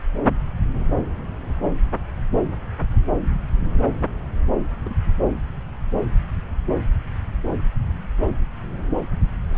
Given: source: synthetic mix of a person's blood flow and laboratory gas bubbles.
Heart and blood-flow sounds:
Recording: Doppler ultrasound of blood flow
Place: subclavian vein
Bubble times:
4.84-4.94 s: bubbles
9.48-9.58 s: bubbles
From the record:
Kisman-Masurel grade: 121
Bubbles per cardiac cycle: 1 to 2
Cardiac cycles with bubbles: 10 to 50%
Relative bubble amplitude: barely perceptible (0.100 to 0.250)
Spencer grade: 2 (many but less than half of the cardiac periods contain bubble signals, singularly or in groups)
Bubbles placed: anywhere in the cardiac cycle

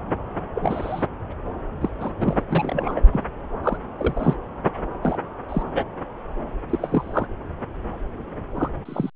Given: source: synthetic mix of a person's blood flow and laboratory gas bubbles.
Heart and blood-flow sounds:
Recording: Doppler ultrasound of blood flow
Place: subclavian vein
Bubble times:
0.54-1.06 s: bubbles
1.81-1.90 s: bubbles
2.00-2.12 s: bubbles
2.20-2.43 s: bubbles
2.49-3.02 s: bubbles
3.12-3.21 s: bubbles
3.63-3.77 s: bubbles
3.98-4.35 s: bubbles
5.02-5.18 s: bubbles
5.48-5.63 s: bubbles
5.75-5.84 s: bubbles
6.69-7.26 s: bubbles
8.56-8.70 s: bubbles
8.85-9.10 s: bubbles
From the record:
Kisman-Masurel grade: 242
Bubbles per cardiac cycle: several, 3 to 8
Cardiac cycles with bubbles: 100%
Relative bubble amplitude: moderate (0.250 to 0.450)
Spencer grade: 3 (all of the cardiac periods contain showers or single bubble signals, but not dominating or overriding the cardiac motion signals)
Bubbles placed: anywhere in the cardiac cycle

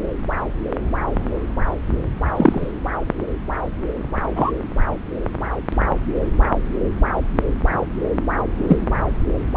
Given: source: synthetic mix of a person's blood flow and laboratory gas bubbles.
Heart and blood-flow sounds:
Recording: Doppler ultrasound of blood flow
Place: subclavian vein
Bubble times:
2.36-2.71 s: bubbles
4.35-4.51 s: bubbles
8.68-8.77 s: bubbles
From the record:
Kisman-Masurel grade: 123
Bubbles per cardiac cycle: 1 to 2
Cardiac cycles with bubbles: 10 to 50%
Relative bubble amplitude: loud (0.450 to 0.775)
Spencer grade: 2 (many but less than half of the cardiac periods contain bubble signals, singularly or in groups)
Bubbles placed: anywhere in the cardiac cycle

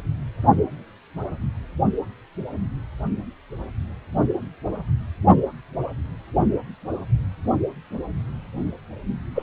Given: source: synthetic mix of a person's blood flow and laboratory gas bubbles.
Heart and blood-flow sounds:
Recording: Doppler ultrasound of blood flow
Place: precordium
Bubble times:
9.35-9.42 s: bubbles
From the record:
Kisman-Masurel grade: 222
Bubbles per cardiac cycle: several, 3 to 8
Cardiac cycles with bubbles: 10 to 50%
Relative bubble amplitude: moderate (0.250 to 0.450)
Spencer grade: 2 (many but less than half of the cardiac periods contain bubble signals, singularly or in groups)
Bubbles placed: only in the low amplitude regions of the cardiac cycle

